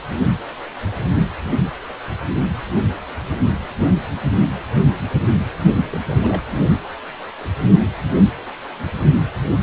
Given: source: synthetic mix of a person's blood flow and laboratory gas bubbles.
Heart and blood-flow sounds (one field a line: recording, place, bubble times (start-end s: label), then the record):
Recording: Doppler ultrasound of blood flow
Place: precordium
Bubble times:
5.92-6.00 s: bubbles
6.09-6.15 s: bubbles
6.21-6.44 s: bubbles
From the record:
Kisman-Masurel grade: 211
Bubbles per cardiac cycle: several, 3 to 8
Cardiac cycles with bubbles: 1 to 10%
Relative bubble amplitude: barely perceptible (0.100 to 0.250)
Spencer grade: 1 (occasional bubble signal discernible with the cardiac motion signal, with majority of cardiac periods free of bubbles)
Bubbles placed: anywhere in the cardiac cycle